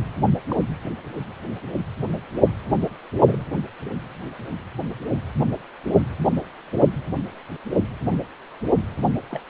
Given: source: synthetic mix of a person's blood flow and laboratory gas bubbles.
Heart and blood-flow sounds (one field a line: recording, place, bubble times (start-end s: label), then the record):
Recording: Doppler ultrasound of blood flow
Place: precordium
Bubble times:
0.48-0.56 s: bubbles
3.25-3.44 s: bubbles
8.11-8.19 s: bubbles
9.29-9.40 s: bubbles
From the record:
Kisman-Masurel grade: 121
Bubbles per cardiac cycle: 1 to 2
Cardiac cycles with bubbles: 10 to 50%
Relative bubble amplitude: barely perceptible (0.100 to 0.250)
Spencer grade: 2 (many but less than half of the cardiac periods contain bubble signals, singularly or in groups)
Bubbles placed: only in the low amplitude regions of the cardiac cycle